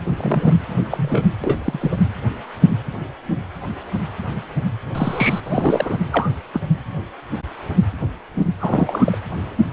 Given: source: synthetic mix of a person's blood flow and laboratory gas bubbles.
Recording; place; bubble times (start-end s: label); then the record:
Doppler ultrasound of blood flow; precordium
0.05-0.11 s: bubbles
0.17-0.54 s: bubbles
0.90-1.28 s: bubbles
1.44-1.97 s: bubbles
4.95-5.40 s: bubbles
5.45-5.98 s: bubbles
6.11-6.30 s: bubbles
6.53-6.61 s: bubbles
8.60-9.18 s: bubbles
From the record:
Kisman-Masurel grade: 232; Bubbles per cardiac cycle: several, 3 to 8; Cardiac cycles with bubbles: 50 to 99%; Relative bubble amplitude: moderate (0.250 to 0.450); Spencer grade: 3 (all of the cardiac periods contain showers or single bubble signals, but not dominating or overriding the cardiac motion signals); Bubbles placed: anywhere in the cardiac cycle